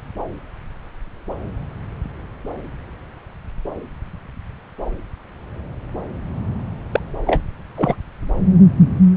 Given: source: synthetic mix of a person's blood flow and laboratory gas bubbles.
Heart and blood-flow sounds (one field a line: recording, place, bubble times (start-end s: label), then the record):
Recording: Doppler ultrasound of blood flow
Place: subclavian vein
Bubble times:
6.92-7.00 s: bubbles
7.26-7.42 s: bubbles
7.76-7.95 s: bubbles
From the record:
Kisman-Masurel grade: 123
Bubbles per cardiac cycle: 1 to 2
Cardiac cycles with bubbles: 10 to 50%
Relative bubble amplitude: loud (0.450 to 0.775)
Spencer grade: 2 (many but less than half of the cardiac periods contain bubble signals, singularly or in groups)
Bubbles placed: anywhere in the cardiac cycle